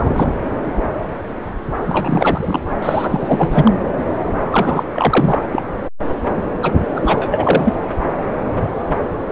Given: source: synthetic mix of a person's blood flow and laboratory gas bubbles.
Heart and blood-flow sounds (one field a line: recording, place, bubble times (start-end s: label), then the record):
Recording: Doppler ultrasound of blood flow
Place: subclavian vein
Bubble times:
0.00-0.29 s: bubbles
1.87-2.60 s: bubbles
2.82-3.71 s: bubbles
4.50-4.83 s: bubbles
4.92-5.42 s: bubbles
5.52-5.62 s: bubbles
6.62-6.71 s: bubbles
6.95-7.74 s: bubbles
From the record:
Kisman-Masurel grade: 333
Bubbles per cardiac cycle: rolling drumbeat, 9 or more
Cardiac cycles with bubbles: 50 to 99%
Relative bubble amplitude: loud (0.450 to 0.775)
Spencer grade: 3 (all of the cardiac periods contain showers or single bubble signals, but not dominating or overriding the cardiac motion signals)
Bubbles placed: anywhere in the cardiac cycle